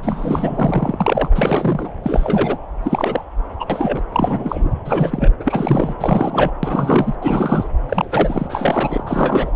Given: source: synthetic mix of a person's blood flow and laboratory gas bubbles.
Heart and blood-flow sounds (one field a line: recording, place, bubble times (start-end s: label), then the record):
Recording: Doppler ultrasound of blood flow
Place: subclavian vein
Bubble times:
0.02-1.29 s: bubbles
1.34-1.88 s: bubbles
2.03-2.58 s: bubbles
2.83-3.25 s: bubbles
3.60-3.65 s: bubbles
3.69-4.02 s: bubbles
4.12-4.74 s: bubbles
4.84-5.33 s: bubbles
5.39-5.95 s: bubbles
6.00-6.51 s: bubbles
6.63-7.15 s: bubbles
7.21-7.69 s: bubbles
7.88-9.51 s: bubbles
From the record:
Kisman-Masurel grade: 342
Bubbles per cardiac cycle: rolling drumbeat, 9 or more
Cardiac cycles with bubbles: 100%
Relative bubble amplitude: moderate (0.250 to 0.450)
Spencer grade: 3 (all of the cardiac periods contain showers or single bubble signals, but not dominating or overriding the cardiac motion signals)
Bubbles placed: anywhere in the cardiac cycle